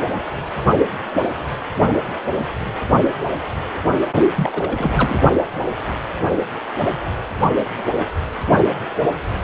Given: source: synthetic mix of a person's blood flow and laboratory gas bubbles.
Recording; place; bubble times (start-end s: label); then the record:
Doppler ultrasound of blood flow; precordium
4.36-5.19 s: bubbles
From the record:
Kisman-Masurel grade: 212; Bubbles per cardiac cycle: several, 3 to 8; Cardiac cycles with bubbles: 1 to 10%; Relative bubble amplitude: moderate (0.250 to 0.450); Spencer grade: 1 (occasional bubble signal discernible with the cardiac motion signal, with majority of cardiac periods free of bubbles); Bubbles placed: only in the low amplitude regions of the cardiac cycle